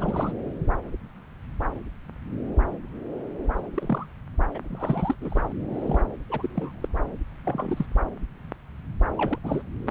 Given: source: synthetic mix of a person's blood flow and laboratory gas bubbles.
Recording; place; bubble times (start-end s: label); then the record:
Doppler ultrasound of blood flow; subclavian vein
0.00-0.33 s: bubbles
3.75-4.06 s: bubbles
4.54-4.58 s: bubbles
4.64-5.16 s: bubbles
5.21-5.41 s: bubbles
5.74-6.02 s: bubbles
6.29-6.88 s: bubbles
7.45-7.86 s: bubbles
9.12-9.38 s: bubbles
9.43-9.62 s: bubbles
9.87-9.91 s: bubbles
From the record:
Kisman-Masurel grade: 221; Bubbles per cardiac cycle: several, 3 to 8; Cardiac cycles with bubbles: 10 to 50%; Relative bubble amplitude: barely perceptible (0.100 to 0.250); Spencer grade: 2 (many but less than half of the cardiac periods contain bubble signals, singularly or in groups); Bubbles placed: anywhere in the cardiac cycle